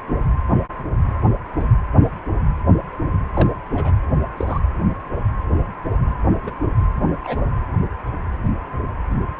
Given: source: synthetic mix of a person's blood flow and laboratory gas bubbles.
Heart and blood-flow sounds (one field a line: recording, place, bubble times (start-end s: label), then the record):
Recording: Doppler ultrasound of blood flow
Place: precordium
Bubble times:
3.33-3.48 s: bubbles
3.71-3.96 s: bubbles
4.37-4.59 s: bubbles
6.43-6.52 s: bubbles
7.23-7.44 s: bubbles
From the record:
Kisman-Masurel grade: 122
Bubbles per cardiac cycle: 1 to 2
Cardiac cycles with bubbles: 10 to 50%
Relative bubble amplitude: moderate (0.250 to 0.450)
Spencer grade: 2 (many but less than half of the cardiac periods contain bubble signals, singularly or in groups)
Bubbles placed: anywhere in the cardiac cycle